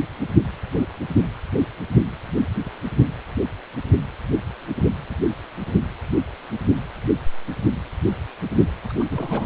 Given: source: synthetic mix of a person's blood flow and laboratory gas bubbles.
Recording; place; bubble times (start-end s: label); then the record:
Doppler ultrasound of blood flow; precordium
8.89-8.93 s: bubbles
8.99-9.04 s: bubbles
9.09-9.46 s: bubbles
From the record:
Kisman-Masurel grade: 211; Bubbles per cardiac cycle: several, 3 to 8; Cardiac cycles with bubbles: 1 to 10%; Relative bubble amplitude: barely perceptible (0.100 to 0.250); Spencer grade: 1 (occasional bubble signal discernible with the cardiac motion signal, with majority of cardiac periods free of bubbles); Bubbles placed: anywhere in the cardiac cycle